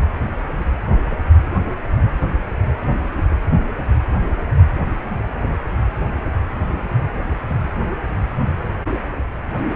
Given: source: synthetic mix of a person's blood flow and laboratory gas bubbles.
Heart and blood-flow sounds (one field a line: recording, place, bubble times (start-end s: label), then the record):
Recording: Doppler ultrasound of blood flow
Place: precordium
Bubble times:
1.10-1.17 s: bubbles
3.17-3.23 s: bubbles
3.30-3.38 s: bubbles
From the record:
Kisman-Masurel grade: 121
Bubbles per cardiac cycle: 1 to 2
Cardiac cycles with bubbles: 10 to 50%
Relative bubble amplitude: barely perceptible (0.100 to 0.250)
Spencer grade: 2 (many but less than half of the cardiac periods contain bubble signals, singularly or in groups)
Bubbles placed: anywhere in the cardiac cycle